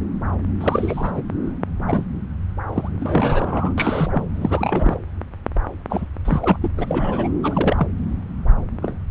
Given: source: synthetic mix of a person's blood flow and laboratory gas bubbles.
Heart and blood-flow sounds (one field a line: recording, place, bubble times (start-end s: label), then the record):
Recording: Doppler ultrasound of blood flow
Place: subclavian vein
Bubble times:
0.60-1.23 s: bubbles
1.87-2.06 s: bubbles
2.73-2.89 s: bubbles
3.00-3.74 s: bubbles
3.78-4.24 s: bubbles
4.34-4.98 s: bubbles
5.90-6.05 s: bubbles
6.25-6.58 s: bubbles
6.61-6.71 s: bubbles
6.77-7.29 s: bubbles
7.42-7.88 s: bubbles
8.82-8.96 s: bubbles
From the record:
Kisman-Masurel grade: 232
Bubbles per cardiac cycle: several, 3 to 8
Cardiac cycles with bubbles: 50 to 99%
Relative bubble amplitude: moderate (0.250 to 0.450)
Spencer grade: 3 (all of the cardiac periods contain showers or single bubble signals, but not dominating or overriding the cardiac motion signals)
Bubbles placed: anywhere in the cardiac cycle